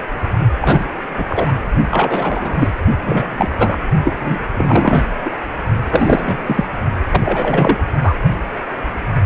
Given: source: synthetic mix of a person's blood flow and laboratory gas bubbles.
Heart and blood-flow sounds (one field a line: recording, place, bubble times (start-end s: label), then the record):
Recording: Doppler ultrasound of blood flow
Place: precordium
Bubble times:
0.61-0.85 s: bubbles
1.17-1.25 s: bubbles
1.29-1.53 s: bubbles
1.91-2.76 s: bubbles
3.05-3.51 s: bubbles
3.58-3.76 s: bubbles
4.04-4.14 s: bubbles
4.19-4.39 s: bubbles
4.56-5.04 s: bubbles
5.25-5.30 s: bubbles
5.91-6.42 s: bubbles
6.46-6.68 s: bubbles
7.12-7.83 s: bubbles
8.03-8.15 s: bubbles
From the record:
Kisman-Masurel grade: 233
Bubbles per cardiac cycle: several, 3 to 8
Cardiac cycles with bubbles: 50 to 99%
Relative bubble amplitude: loud (0.450 to 0.775)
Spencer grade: 3 (all of the cardiac periods contain showers or single bubble signals, but not dominating or overriding the cardiac motion signals)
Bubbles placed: only in the low amplitude regions of the cardiac cycle